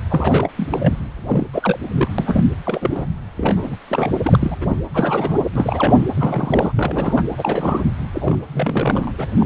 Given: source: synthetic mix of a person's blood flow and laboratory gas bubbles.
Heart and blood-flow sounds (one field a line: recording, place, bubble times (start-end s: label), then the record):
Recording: Doppler ultrasound of blood flow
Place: precordium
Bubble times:
0.10-0.50 s: bubbles
0.57-0.67 s: bubbles
0.70-0.95 s: bubbles
1.24-1.47 s: bubbles
1.53-2.10 s: bubbles
2.18-2.44 s: bubbles
2.65-3.06 s: bubbles
3.36-3.76 s: bubbles
3.88-4.19 s: bubbles
4.23-4.57 s: bubbles
4.60-4.66 s: bubbles
4.68-4.79 s: bubbles
4.93-5.44 s: bubbles
5.55-6.09 s: bubbles
6.16-6.72 s: bubbles
6.77-7.23 s: bubbles
7.38-7.84 s: bubbles
8.13-8.38 s: bubbles
8.53-9.12 s: bubbles
9.18-9.27 s: bubbles
9.36-9.46 s: bubbles
From the record:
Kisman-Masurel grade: 342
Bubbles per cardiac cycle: rolling drumbeat, 9 or more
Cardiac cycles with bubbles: 100%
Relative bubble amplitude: moderate (0.250 to 0.450)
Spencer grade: 3 (all of the cardiac periods contain showers or single bubble signals, but not dominating or overriding the cardiac motion signals)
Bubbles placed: anywhere in the cardiac cycle